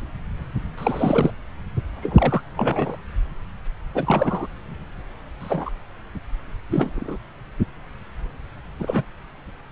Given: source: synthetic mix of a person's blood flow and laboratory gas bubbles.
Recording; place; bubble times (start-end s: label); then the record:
Doppler ultrasound of blood flow; subclavian vein
0.77-1.30 s: bubbles
2.02-2.43 s: bubbles
2.56-2.97 s: bubbles
3.94-4.46 s: bubbles
5.40-5.71 s: bubbles
6.71-7.17 s: bubbles
8.79-9.04 s: bubbles
From the record:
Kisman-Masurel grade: 232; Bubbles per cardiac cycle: several, 3 to 8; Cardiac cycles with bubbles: 50 to 99%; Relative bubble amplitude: moderate (0.250 to 0.450); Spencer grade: 3 (all of the cardiac periods contain showers or single bubble signals, but not dominating or overriding the cardiac motion signals); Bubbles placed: anywhere in the cardiac cycle